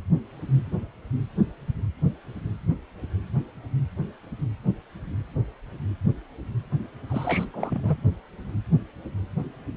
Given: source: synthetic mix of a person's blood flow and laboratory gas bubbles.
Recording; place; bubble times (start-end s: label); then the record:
Doppler ultrasound of blood flow; precordium
7.06-7.47 s: bubbles
7.54-7.80 s: bubbles
7.83-7.98 s: bubbles
From the record:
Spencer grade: 1 (occasional bubble signal discernible with the cardiac motion signal, with majority of cardiac periods free of bubbles); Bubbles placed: anywhere in the cardiac cycle